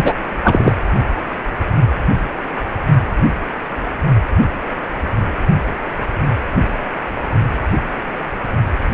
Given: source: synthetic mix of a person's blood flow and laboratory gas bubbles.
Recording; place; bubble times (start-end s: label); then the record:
Doppler ultrasound of blood flow; precordium
0.00-0.14 s: bubbles
0.42-0.73 s: bubbles
From the record:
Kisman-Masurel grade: 213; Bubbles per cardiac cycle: several, 3 to 8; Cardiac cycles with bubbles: 1 to 10%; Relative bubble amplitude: loud (0.450 to 0.775); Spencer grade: 1 (occasional bubble signal discernible with the cardiac motion signal, with majority of cardiac periods free of bubbles); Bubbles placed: only in the low amplitude regions of the cardiac cycle